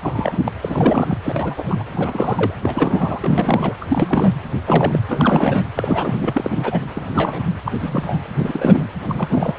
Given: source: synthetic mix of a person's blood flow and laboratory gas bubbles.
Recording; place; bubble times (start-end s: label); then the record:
Doppler ultrasound of blood flow; precordium
0.02-0.41 s: bubbles
0.44-0.52 s: bubbles
0.64-1.18 s: bubbles
1.23-1.83 s: bubbles
1.93-2.54 s: bubbles
2.62-3.76 s: bubbles
3.81-3.85 s: bubbles
3.88-4.31 s: bubbles
4.66-5.00 s: bubbles
5.08-5.70 s: bubbles
5.75-6.80 s: bubbles
6.95-7.43 s: bubbles
7.65-7.71 s: bubbles
7.79-8.19 s: bubbles
8.38-8.88 s: bubbles
9.00-9.54 s: bubbles
From the record:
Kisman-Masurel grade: 242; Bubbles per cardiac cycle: several, 3 to 8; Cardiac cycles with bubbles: 100%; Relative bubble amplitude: moderate (0.250 to 0.450); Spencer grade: 3 (all of the cardiac periods contain showers or single bubble signals, but not dominating or overriding the cardiac motion signals); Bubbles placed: anywhere in the cardiac cycle